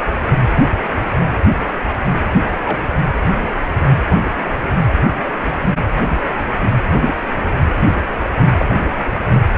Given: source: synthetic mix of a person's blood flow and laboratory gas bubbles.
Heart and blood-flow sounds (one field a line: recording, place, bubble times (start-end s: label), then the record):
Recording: Doppler ultrasound of blood flow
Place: precordium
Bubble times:
2.65-2.83 s: bubbles
4.06-4.31 s: bubbles
8.58-8.75 s: bubbles
From the record:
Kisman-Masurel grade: 121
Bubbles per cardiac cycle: 1 to 2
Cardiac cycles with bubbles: 10 to 50%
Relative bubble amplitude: barely perceptible (0.100 to 0.250)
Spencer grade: 2 (many but less than half of the cardiac periods contain bubble signals, singularly or in groups)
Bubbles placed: anywhere in the cardiac cycle